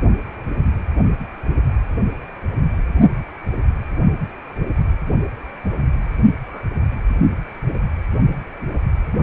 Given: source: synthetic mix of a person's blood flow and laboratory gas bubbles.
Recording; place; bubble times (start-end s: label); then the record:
Doppler ultrasound of blood flow; precordium
6.47-6.60 s: bubbles
From the record:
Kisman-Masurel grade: 121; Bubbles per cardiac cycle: 1 to 2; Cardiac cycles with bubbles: 10 to 50%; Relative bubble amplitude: barely perceptible (0.100 to 0.250); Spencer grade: 2 (many but less than half of the cardiac periods contain bubble signals, singularly or in groups); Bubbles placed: only in the low amplitude regions of the cardiac cycle